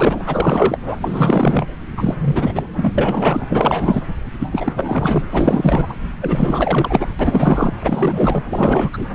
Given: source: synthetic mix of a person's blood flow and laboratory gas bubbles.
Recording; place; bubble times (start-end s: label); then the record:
Doppler ultrasound of blood flow; subclavian vein
0.00-0.23 s: bubbles
0.25-0.78 s: bubbles
0.85-0.98 s: bubbles
1.00-1.67 s: bubbles
1.97-2.15 s: bubbles
2.21-2.69 s: bubbles
2.75-2.92 s: bubbles
2.98-3.46 s: bubbles
3.48-4.03 s: bubbles
4.40-4.72 s: bubbles
4.76-5.24 s: bubbles
5.32-5.94 s: bubbles
6.21-7.07 s: bubbles
7.19-7.74 s: bubbles
7.80-8.43 s: bubbles
8.50-9.06 s: bubbles
9.12-9.15 s: bubbles
From the record:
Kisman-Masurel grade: 444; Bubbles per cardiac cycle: continuous sound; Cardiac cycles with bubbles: 100%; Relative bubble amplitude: maximal (0.775 to 0.999); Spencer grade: 4 (maximum detectable bubble signal sounding continuously throughout systole and diastole of every cardiac period, and overriding the amplitude of the normal cardiac signals); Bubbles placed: anywhere in the cardiac cycle